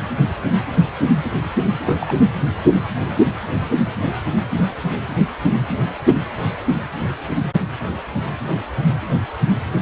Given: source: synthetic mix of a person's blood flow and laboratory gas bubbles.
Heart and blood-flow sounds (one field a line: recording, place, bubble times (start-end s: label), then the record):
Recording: Doppler ultrasound of blood flow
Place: precordium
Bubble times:
1.85-2.13 s: bubbles
From the record:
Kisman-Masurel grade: 212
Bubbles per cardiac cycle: several, 3 to 8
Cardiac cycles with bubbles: 1 to 10%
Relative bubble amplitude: moderate (0.250 to 0.450)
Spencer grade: 1 (occasional bubble signal discernible with the cardiac motion signal, with majority of cardiac periods free of bubbles)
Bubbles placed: anywhere in the cardiac cycle